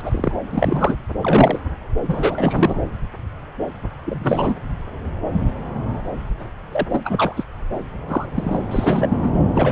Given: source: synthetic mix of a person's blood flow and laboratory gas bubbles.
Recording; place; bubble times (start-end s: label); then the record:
Doppler ultrasound of blood flow; subclavian vein
0.05-0.32 s: bubbles
0.52-0.95 s: bubbles
1.21-1.59 s: bubbles
2.07-2.76 s: bubbles
4.05-4.54 s: bubbles
6.71-6.87 s: bubbles
6.92-7.44 s: bubbles
8.08-8.26 s: bubbles
8.35-8.62 s: bubbles
8.71-9.17 s: bubbles
9.23-9.29 s: bubbles
9.54-9.72 s: bubbles
From the record:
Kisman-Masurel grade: 233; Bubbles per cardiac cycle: several, 3 to 8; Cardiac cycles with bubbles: 50 to 99%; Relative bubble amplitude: loud (0.450 to 0.775); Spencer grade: 3 (all of the cardiac periods contain showers or single bubble signals, but not dominating or overriding the cardiac motion signals); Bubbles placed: anywhere in the cardiac cycle